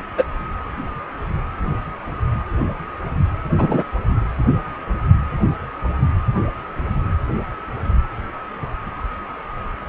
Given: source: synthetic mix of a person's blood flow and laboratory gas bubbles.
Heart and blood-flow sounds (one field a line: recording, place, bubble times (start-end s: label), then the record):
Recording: Doppler ultrasound of blood flow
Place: precordium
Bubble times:
0.17-0.23 s: bubbles
3.58-3.83 s: bubbles
From the record:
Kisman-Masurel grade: 123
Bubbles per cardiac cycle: 1 to 2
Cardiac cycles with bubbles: 10 to 50%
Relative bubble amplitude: loud (0.450 to 0.775)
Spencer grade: 2 (many but less than half of the cardiac periods contain bubble signals, singularly or in groups)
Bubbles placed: anywhere in the cardiac cycle